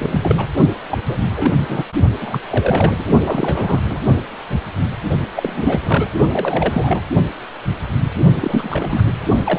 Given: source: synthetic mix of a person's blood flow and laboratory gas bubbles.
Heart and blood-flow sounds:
Doppler ultrasound of blood flow; precordium
0.00-0.46 s: bubbles
0.89-0.98 s: bubbles
1.08-1.17 s: bubbles
1.35-1.52 s: bubbles
1.59-1.85 s: bubbles
2.20-2.40 s: bubbles
2.50-2.96 s: bubbles
2.98-3.04 s: bubbles
3.21-3.81 s: bubbles
3.90-3.98 s: bubbles
5.36-6.10 s: bubbles
6.32-7.03 s: bubbles
8.40-9.02 s: bubbles
9.44-9.59 s: bubbles
From the record:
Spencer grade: 3 (all of the cardiac periods contain showers or single bubble signals, but not dominating or overriding the cardiac motion signals); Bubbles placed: only in the low amplitude regions of the cardiac cycle

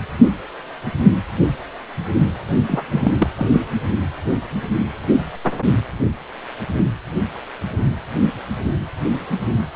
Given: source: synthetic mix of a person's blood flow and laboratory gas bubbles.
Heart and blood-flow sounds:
Doppler ultrasound of blood flow; precordium
2.67-2.85 s: bubbles
2.91-3.12 s: bubbles
3.19-3.29 s: bubbles
3.36-3.49 s: bubbles
3.52-3.66 s: bubbles
From the record:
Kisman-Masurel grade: 212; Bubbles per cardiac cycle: several, 3 to 8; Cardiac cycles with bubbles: 1 to 10%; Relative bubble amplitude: moderate (0.250 to 0.450); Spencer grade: 1 (occasional bubble signal discernible with the cardiac motion signal, with majority of cardiac periods free of bubbles); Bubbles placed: only in the low amplitude regions of the cardiac cycle

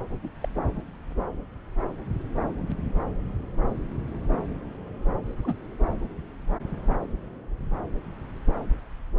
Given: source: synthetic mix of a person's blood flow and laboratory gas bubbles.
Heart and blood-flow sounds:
Doppler ultrasound of blood flow; subclavian vein
0.23-0.30 s: bubbles
0.41-0.48 s: bubbles
5.27-5.56 s: bubbles
From the record:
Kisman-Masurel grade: 121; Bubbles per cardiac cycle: 1 to 2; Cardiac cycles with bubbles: 10 to 50%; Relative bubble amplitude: barely perceptible (0.100 to 0.250); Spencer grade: 2 (many but less than half of the cardiac periods contain bubble signals, singularly or in groups); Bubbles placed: anywhere in the cardiac cycle

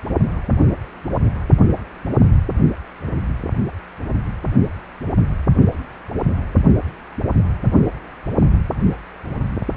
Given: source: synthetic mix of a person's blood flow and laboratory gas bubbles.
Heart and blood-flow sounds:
Doppler ultrasound of blood flow; precordium
no bubbles
From the record:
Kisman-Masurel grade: 000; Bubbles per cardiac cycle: 0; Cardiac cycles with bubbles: 0%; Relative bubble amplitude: no bubbles discernible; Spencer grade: 0 (complete lack of bubble signals)

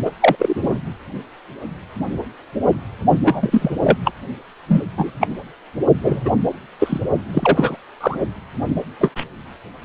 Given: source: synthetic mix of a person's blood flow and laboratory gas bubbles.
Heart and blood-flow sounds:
Doppler ultrasound of blood flow; precordium
0.05-0.11 s: bubbles
0.20-0.35 s: bubbles
0.39-0.79 s: bubbles
3.23-3.71 s: bubbles
3.82-3.97 s: bubbles
4.04-4.12 s: bubbles
4.68-4.84 s: bubbles
4.97-5.12 s: bubbles
5.20-5.27 s: bubbles
6.01-6.21 s: bubbles
6.24-6.30 s: bubbles
6.79-7.00 s: bubbles
7.33-7.76 s: bubbles
8.01-8.18 s: bubbles
9.00-9.12 s: bubbles
9.16-9.25 s: bubbles
From the record:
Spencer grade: 3 (all of the cardiac periods contain showers or single bubble signals, but not dominating or overriding the cardiac motion signals); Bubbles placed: only in the low amplitude regions of the cardiac cycle

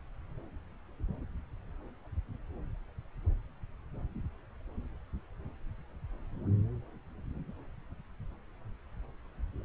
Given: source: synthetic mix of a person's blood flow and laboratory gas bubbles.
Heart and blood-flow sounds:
Doppler ultrasound of blood flow; subclavian vein
no bubbles
From the record:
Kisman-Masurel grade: 000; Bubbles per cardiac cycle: 0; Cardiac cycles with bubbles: 0%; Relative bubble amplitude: no bubbles discernible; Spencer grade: 0 (complete lack of bubble signals)

